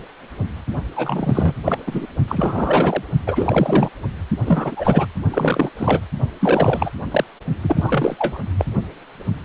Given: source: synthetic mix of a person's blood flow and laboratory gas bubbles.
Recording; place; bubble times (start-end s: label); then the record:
Doppler ultrasound of blood flow; precordium
0.96-1.54 s: bubbles
1.65-1.78 s: bubbles
1.86-2.06 s: bubbles
2.27-3.03 s: bubbles
3.26-3.90 s: bubbles
4.46-5.05 s: bubbles
5.30-5.70 s: bubbles
5.78-6.00 s: bubbles
6.40-6.91 s: bubbles
7.11-7.24 s: bubbles
7.63-8.39 s: bubbles
8.58-8.65 s: bubbles
From the record:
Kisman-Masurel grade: 333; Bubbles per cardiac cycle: rolling drumbeat, 9 or more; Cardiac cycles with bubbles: 50 to 99%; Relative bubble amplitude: loud (0.450 to 0.775); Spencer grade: 3 (all of the cardiac periods contain showers or single bubble signals, but not dominating or overriding the cardiac motion signals); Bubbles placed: only in the low amplitude regions of the cardiac cycle